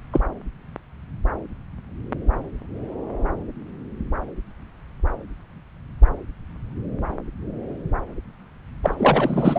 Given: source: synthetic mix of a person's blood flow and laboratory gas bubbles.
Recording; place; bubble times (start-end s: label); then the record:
Doppler ultrasound of blood flow; subclavian vein
0.12-0.20 s: bubbles
8.83-8.95 s: bubbles
8.97-9.59 s: bubbles
From the record:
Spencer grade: 2 (many but less than half of the cardiac periods contain bubble signals, singularly or in groups); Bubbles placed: anywhere in the cardiac cycle